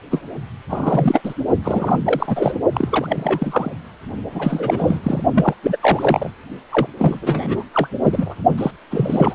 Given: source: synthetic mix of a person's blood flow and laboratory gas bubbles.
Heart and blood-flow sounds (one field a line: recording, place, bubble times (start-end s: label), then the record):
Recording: Doppler ultrasound of blood flow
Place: precordium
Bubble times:
0.10-0.21 s: bubbles
0.69-1.21 s: bubbles
1.23-1.34 s: bubbles
1.64-1.97 s: bubbles
2.04-2.55 s: bubbles
2.73-3.71 s: bubbles
4.31-5.00 s: bubbles
5.03-5.23 s: bubbles
5.35-5.54 s: bubbles
5.62-5.77 s: bubbles
5.79-6.30 s: bubbles
6.71-6.87 s: bubbles
6.97-7.19 s: bubbles
7.21-7.62 s: bubbles
7.74-7.88 s: bubbles
8.04-8.35 s: bubbles
8.58-8.71 s: bubbles
8.91-9.35 s: bubbles
From the record:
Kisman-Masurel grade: 343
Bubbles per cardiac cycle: rolling drumbeat, 9 or more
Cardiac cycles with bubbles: 100%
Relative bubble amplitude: loud (0.450 to 0.775)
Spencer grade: 3 (all of the cardiac periods contain showers or single bubble signals, but not dominating or overriding the cardiac motion signals)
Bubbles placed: only in the low amplitude regions of the cardiac cycle